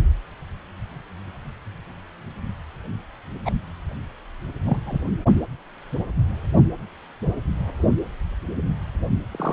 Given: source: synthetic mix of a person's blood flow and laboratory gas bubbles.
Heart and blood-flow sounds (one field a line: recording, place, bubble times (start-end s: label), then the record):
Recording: Doppler ultrasound of blood flow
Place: precordium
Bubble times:
3.45-3.51 s: bubbles
4.65-4.80 s: bubbles
4.86-5.00 s: bubbles
9.31-9.53 s: bubbles
From the record:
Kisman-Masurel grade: 122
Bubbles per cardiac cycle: 1 to 2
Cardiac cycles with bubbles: 10 to 50%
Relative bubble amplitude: moderate (0.250 to 0.450)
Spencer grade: 2 (many but less than half of the cardiac periods contain bubble signals, singularly or in groups)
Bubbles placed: anywhere in the cardiac cycle